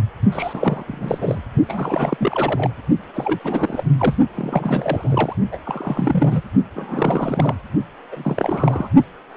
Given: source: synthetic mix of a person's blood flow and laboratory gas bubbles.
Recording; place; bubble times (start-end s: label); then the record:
Doppler ultrasound of blood flow; precordium
0.32-0.84 s: bubbles
0.87-1.40 s: bubbles
1.67-2.71 s: bubbles
3.15-3.39 s: bubbles
3.42-3.84 s: bubbles
3.98-4.14 s: bubbles
4.35-5.36 s: bubbles
5.51-5.59 s: bubbles
5.65-6.41 s: bubbles
6.75-7.54 s: bubbles
8.12-8.89 s: bubbles
From the record:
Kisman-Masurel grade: 342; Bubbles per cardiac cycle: rolling drumbeat, 9 or more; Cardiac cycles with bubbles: 100%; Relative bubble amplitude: moderate (0.250 to 0.450); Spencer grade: 3 (all of the cardiac periods contain showers or single bubble signals, but not dominating or overriding the cardiac motion signals); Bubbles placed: only in the low amplitude regions of the cardiac cycle